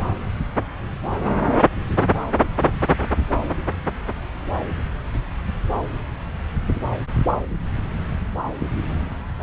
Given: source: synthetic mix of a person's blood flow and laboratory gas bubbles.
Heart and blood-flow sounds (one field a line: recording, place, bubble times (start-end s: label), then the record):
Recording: Doppler ultrasound of blood flow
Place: subclavian vein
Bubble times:
no bubbles
From the record:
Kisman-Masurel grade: 000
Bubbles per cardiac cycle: 0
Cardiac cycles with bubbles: 0%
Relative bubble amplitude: no bubbles discernible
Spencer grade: 0 (complete lack of bubble signals)